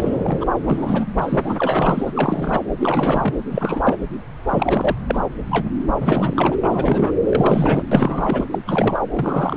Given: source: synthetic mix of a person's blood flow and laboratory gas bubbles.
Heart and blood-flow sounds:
Doppler ultrasound of blood flow; subclavian vein
0.00-0.46 s: bubbles
0.64-1.06 s: bubbles
1.21-2.60 s: bubbles
2.79-3.38 s: bubbles
3.50-3.97 s: bubbles
4.49-4.96 s: bubbles
5.07-5.20 s: bubbles
5.51-5.68 s: bubbles
6.00-6.58 s: bubbles
6.63-7.12 s: bubbles
7.26-7.83 s: bubbles
7.91-8.45 s: bubbles
8.51-8.58 s: bubbles
8.65-9.00 s: bubbles
9.11-9.57 s: bubbles
From the record:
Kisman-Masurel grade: 343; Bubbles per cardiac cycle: rolling drumbeat, 9 or more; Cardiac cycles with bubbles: 100%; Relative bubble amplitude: loud (0.450 to 0.775); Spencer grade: 3 (all of the cardiac periods contain showers or single bubble signals, but not dominating or overriding the cardiac motion signals); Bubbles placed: anywhere in the cardiac cycle

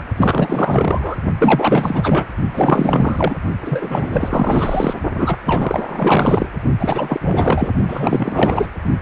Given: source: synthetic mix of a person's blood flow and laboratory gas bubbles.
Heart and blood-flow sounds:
Doppler ultrasound of blood flow; precordium
0.00-0.04 s: bubbles
0.17-1.16 s: bubbles
1.38-2.28 s: bubbles
2.54-3.34 s: bubbles
3.61-4.95 s: bubbles
5.17-5.37 s: bubbles
5.45-6.49 s: bubbles
6.79-7.72 s: bubbles
7.88-8.70 s: bubbles
From the record:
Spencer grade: 4 (maximum detectable bubble signal sounding continuously throughout systole and diastole of every cardiac period, and overriding the amplitude of the normal cardiac signals); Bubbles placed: only in the low amplitude regions of the cardiac cycle

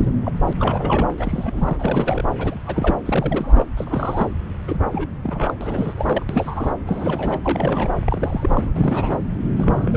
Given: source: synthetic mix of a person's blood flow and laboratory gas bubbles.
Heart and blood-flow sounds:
Doppler ultrasound of blood flow; subclavian vein
0.00-0.10 s: bubbles
0.25-0.32 s: bubbles
0.47-0.53 s: bubbles
0.59-1.09 s: bubbles
1.18-2.25 s: bubbles
2.38-2.56 s: bubbles
2.66-2.95 s: bubbles
3.06-3.65 s: bubbles
3.77-4.27 s: bubbles
4.68-4.79 s: bubbles
4.93-5.54 s: bubbles
5.61-6.23 s: bubbles
6.29-6.73 s: bubbles
6.87-7.40 s: bubbles
7.45-7.91 s: bubbles
8.06-8.72 s: bubbles
8.75-9.19 s: bubbles
9.57-9.97 s: bubbles
From the record:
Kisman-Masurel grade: 342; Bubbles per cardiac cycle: rolling drumbeat, 9 or more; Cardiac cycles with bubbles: 100%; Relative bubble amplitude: moderate (0.250 to 0.450); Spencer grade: 3 (all of the cardiac periods contain showers or single bubble signals, but not dominating or overriding the cardiac motion signals); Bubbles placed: anywhere in the cardiac cycle

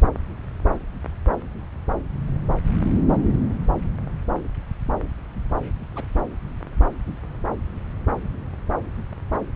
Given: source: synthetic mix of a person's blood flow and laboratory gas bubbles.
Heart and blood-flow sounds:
Doppler ultrasound of blood flow; subclavian vein
5.94-6.04 s: bubbles
8.24-8.29 s: bubbles
From the record:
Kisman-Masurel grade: 121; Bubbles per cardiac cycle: 1 to 2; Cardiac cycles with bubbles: 10 to 50%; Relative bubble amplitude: barely perceptible (0.100 to 0.250); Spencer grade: 2 (many but less than half of the cardiac periods contain bubble signals, singularly or in groups); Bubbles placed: anywhere in the cardiac cycle

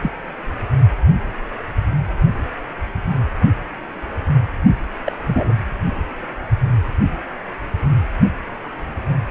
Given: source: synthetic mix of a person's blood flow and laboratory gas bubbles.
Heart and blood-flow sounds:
Doppler ultrasound of blood flow; precordium
0.02-0.12 s: bubbles
5.05-5.17 s: bubbles
5.26-5.54 s: bubbles
From the record:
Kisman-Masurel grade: 122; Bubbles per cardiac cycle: 1 to 2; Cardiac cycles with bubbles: 10 to 50%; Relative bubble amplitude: moderate (0.250 to 0.450); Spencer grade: 2 (many but less than half of the cardiac periods contain bubble signals, singularly or in groups); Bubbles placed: anywhere in the cardiac cycle

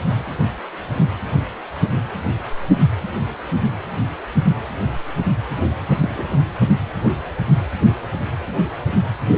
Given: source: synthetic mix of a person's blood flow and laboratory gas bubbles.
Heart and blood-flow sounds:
Doppler ultrasound of blood flow; precordium
6.00-6.25 s: bubbles
From the record:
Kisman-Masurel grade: 112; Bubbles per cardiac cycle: 1 to 2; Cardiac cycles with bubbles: 1 to 10%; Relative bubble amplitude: moderate (0.250 to 0.450); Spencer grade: 1 (occasional bubble signal discernible with the cardiac motion signal, with majority of cardiac periods free of bubbles); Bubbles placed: anywhere in the cardiac cycle

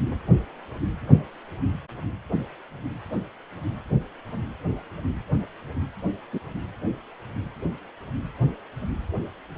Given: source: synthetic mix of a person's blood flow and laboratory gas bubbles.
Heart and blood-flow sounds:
Doppler ultrasound of blood flow; precordium
6.33-6.39 s: bubbles
From the record:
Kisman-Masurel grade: 112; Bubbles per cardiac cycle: 1 to 2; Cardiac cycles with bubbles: 1 to 10%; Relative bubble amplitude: moderate (0.250 to 0.450); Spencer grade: 1 (occasional bubble signal discernible with the cardiac motion signal, with majority of cardiac periods free of bubbles); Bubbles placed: anywhere in the cardiac cycle

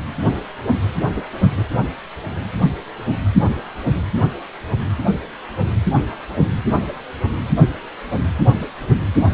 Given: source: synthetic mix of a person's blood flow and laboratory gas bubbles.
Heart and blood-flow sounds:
Doppler ultrasound of blood flow; precordium
1.14-1.22 s: bubbles
1.57-1.64 s: bubbles
From the record:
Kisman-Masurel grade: 112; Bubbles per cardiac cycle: 1 to 2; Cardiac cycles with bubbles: 1 to 10%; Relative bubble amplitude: moderate (0.250 to 0.450); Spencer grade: 1 (occasional bubble signal discernible with the cardiac motion signal, with majority of cardiac periods free of bubbles); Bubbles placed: anywhere in the cardiac cycle

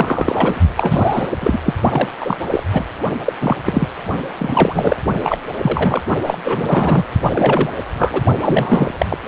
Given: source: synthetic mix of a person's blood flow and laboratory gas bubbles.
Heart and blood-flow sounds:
Doppler ultrasound of blood flow; precordium
0.00-0.60 s: bubbles
0.77-1.30 s: bubbles
1.40-1.58 s: bubbles
1.65-1.74 s: bubbles
1.90-2.09 s: bubbles
2.20-2.37 s: bubbles
2.50-2.63 s: bubbles
2.73-2.85 s: bubbles
3.25-3.33 s: bubbles
3.40-3.56 s: bubbles
3.65-3.87 s: bubbles
4.38-4.96 s: bubbles
5.24-5.38 s: bubbles
5.62-6.01 s: bubbles
6.26-6.38 s: bubbles
6.42-7.05 s: bubbles
7.22-7.70 s: bubbles
7.98-8.21 s: bubbles
8.44-9.06 s: bubbles
9.09-9.18 s: bubbles
9.22-9.28 s: bubbles
From the record:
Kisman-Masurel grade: 343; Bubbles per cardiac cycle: rolling drumbeat, 9 or more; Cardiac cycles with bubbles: 100%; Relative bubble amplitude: loud (0.450 to 0.775); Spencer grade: 3 (all of the cardiac periods contain showers or single bubble signals, but not dominating or overriding the cardiac motion signals); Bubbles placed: only in the low amplitude regions of the cardiac cycle

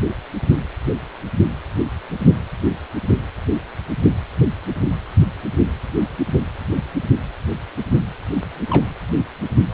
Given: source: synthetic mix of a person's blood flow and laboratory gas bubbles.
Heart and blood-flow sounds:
Doppler ultrasound of blood flow; precordium
8.70-8.91 s: bubbles
From the record:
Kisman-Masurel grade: 111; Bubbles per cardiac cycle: 1 to 2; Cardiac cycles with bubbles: 1 to 10%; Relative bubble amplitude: barely perceptible (0.100 to 0.250); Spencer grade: 1 (occasional bubble signal discernible with the cardiac motion signal, with majority of cardiac periods free of bubbles); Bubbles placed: anywhere in the cardiac cycle

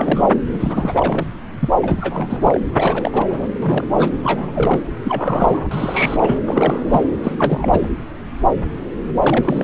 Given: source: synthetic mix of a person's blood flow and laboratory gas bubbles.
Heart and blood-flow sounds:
Doppler ultrasound of blood flow; subclavian vein
0.00-0.31 s: bubbles
0.53-1.27 s: bubbles
1.60-1.70 s: bubbles
1.82-2.60 s: bubbles
2.71-3.48 s: bubbles
3.62-3.87 s: bubbles
3.96-4.10 s: bubbles
4.23-4.82 s: bubbles
5.04-5.69 s: bubbles
5.71-6.39 s: bubbles
6.46-7.04 s: bubbles
7.23-7.35 s: bubbles
7.39-7.89 s: bubbles
9.20-9.64 s: bubbles
From the record:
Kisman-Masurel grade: 332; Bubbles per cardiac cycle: rolling drumbeat, 9 or more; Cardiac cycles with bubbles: 50 to 99%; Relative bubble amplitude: moderate (0.250 to 0.450); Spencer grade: 3 (all of the cardiac periods contain showers or single bubble signals, but not dominating or overriding the cardiac motion signals); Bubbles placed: anywhere in the cardiac cycle

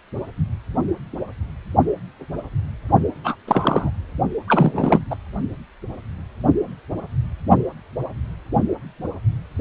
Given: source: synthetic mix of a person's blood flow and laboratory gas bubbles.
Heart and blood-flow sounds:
Doppler ultrasound of blood flow; precordium
3.23-3.36 s: bubbles
3.47-3.90 s: bubbles
4.47-5.00 s: bubbles
5.11-5.16 s: bubbles
From the record:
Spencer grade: 2 (many but less than half of the cardiac periods contain bubble signals, singularly or in groups); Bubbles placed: only in the low amplitude regions of the cardiac cycle

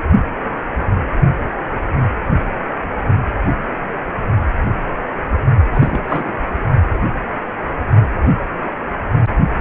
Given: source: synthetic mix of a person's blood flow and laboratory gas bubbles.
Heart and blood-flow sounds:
Doppler ultrasound of blood flow; precordium
5.72-6.40 s: bubbles
From the record:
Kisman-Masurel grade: 212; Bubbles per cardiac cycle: several, 3 to 8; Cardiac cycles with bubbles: 1 to 10%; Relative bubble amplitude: moderate (0.250 to 0.450); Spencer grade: 1 (occasional bubble signal discernible with the cardiac motion signal, with majority of cardiac periods free of bubbles); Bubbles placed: only in the low amplitude regions of the cardiac cycle

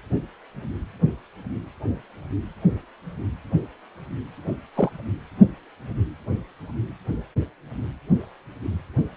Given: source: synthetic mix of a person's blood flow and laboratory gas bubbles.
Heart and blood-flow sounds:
Doppler ultrasound of blood flow; precordium
4.75-4.89 s: bubbles
From the record:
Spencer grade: 1 (occasional bubble signal discernible with the cardiac motion signal, with majority of cardiac periods free of bubbles); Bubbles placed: anywhere in the cardiac cycle

